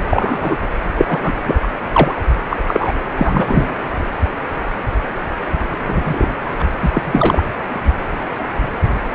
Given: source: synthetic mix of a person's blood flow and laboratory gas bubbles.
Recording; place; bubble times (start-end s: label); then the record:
Doppler ultrasound of blood flow; precordium
0.11-0.56 s: bubbles
0.98-1.19 s: bubbles
1.22-1.32 s: bubbles
1.46-1.55 s: bubbles
1.62-1.68 s: bubbles
1.93-2.15 s: bubbles
2.50-2.57 s: bubbles
2.67-2.92 s: bubbles
3.16-3.77 s: bubbles
5.87-6.29 s: bubbles
6.58-6.65 s: bubbles
6.82-6.90 s: bubbles
6.92-7.01 s: bubbles
7.04-7.43 s: bubbles
From the record:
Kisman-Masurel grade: 233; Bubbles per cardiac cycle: several, 3 to 8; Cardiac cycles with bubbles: 50 to 99%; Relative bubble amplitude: loud (0.450 to 0.775); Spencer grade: 3 (all of the cardiac periods contain showers or single bubble signals, but not dominating or overriding the cardiac motion signals); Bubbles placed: anywhere in the cardiac cycle